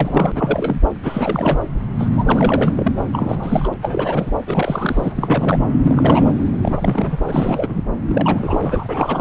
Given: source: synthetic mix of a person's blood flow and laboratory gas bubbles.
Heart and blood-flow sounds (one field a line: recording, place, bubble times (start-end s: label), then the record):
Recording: Doppler ultrasound of blood flow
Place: subclavian vein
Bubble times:
0.00-0.32 s: bubbles
0.34-0.81 s: bubbles
1.03-1.66 s: bubbles
1.98-2.92 s: bubbles
3.13-3.68 s: bubbles
3.72-3.74 s: bubbles
3.77-4.31 s: bubbles
4.46-5.13 s: bubbles
5.16-5.65 s: bubbles
5.81-6.32 s: bubbles
6.62-7.17 s: bubbles
7.27-7.83 s: bubbles
8.07-9.21 s: bubbles
From the record:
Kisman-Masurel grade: 342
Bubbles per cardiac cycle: rolling drumbeat, 9 or more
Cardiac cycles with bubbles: 100%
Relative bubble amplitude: moderate (0.250 to 0.450)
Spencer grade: 3 (all of the cardiac periods contain showers or single bubble signals, but not dominating or overriding the cardiac motion signals)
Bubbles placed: anywhere in the cardiac cycle